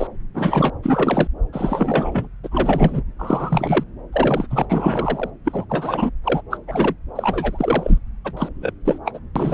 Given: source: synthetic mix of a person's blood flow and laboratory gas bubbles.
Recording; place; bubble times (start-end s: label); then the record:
Doppler ultrasound of blood flow; subclavian vein
0.00-0.07 s: bubbles
0.34-0.70 s: bubbles
0.82-1.27 s: bubbles
1.52-2.28 s: bubbles
2.43-3.02 s: bubbles
3.19-3.83 s: bubbles
4.12-4.47 s: bubbles
4.50-4.66 s: bubbles
4.70-5.30 s: bubbles
5.45-5.65 s: bubbles
5.70-6.10 s: bubbles
6.24-6.42 s: bubbles
6.50-6.58 s: bubbles
6.68-6.94 s: bubbles
7.15-7.98 s: bubbles
8.24-8.33 s: bubbles
8.37-8.49 s: bubbles
8.60-8.72 s: bubbles
8.84-8.98 s: bubbles
9.05-9.19 s: bubbles
9.35-9.54 s: bubbles
From the record:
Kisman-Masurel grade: 343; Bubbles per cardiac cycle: rolling drumbeat, 9 or more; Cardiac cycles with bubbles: 100%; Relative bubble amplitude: loud (0.450 to 0.775); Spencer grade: 3 (all of the cardiac periods contain showers or single bubble signals, but not dominating or overriding the cardiac motion signals); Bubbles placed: anywhere in the cardiac cycle